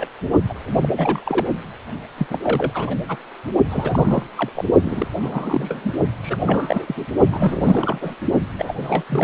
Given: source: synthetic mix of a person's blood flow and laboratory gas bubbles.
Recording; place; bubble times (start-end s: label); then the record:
Doppler ultrasound of blood flow; precordium
0.00-0.08 s: bubbles
0.49-0.53 s: bubbles
0.82-0.89 s: bubbles
0.97-1.45 s: bubbles
2.17-2.27 s: bubbles
2.30-2.39 s: bubbles
2.42-2.96 s: bubbles
3.08-3.17 s: bubbles
3.69-4.22 s: bubbles
4.36-4.49 s: bubbles
4.55-4.64 s: bubbles
4.81-5.07 s: bubbles
5.21-5.94 s: bubbles
6.22-6.37 s: bubbles
6.39-7.05 s: bubbles
7.29-7.98 s: bubbles
8.01-8.14 s: bubbles
8.58-9.04 s: bubbles
9.09-9.24 s: bubbles
From the record:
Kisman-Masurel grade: 332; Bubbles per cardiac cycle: rolling drumbeat, 9 or more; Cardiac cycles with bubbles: 50 to 99%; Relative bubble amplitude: moderate (0.250 to 0.450); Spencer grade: 3 (all of the cardiac periods contain showers or single bubble signals, but not dominating or overriding the cardiac motion signals); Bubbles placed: only in the low amplitude regions of the cardiac cycle